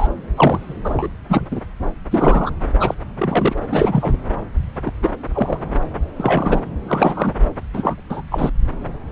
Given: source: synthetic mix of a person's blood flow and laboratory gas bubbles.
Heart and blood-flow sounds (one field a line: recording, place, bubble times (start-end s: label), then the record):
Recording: Doppler ultrasound of blood flow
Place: subclavian vein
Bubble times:
0.00-0.08 s: bubbles
0.35-0.77 s: bubbles
0.84-1.08 s: bubbles
1.29-1.47 s: bubbles
1.51-1.61 s: bubbles
2.10-2.50 s: bubbles
2.80-2.94 s: bubbles
3.17-3.55 s: bubbles
3.70-4.18 s: bubbles
4.86-4.92 s: bubbles
5.02-5.10 s: bubbles
5.33-5.58 s: bubbles
6.16-6.61 s: bubbles
6.87-7.33 s: bubbles
7.73-7.96 s: bubbles
8.10-8.22 s: bubbles
8.30-8.50 s: bubbles
From the record:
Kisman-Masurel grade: 243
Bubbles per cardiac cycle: several, 3 to 8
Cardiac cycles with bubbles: 100%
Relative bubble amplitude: loud (0.450 to 0.775)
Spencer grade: 3 (all of the cardiac periods contain showers or single bubble signals, but not dominating or overriding the cardiac motion signals)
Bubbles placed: anywhere in the cardiac cycle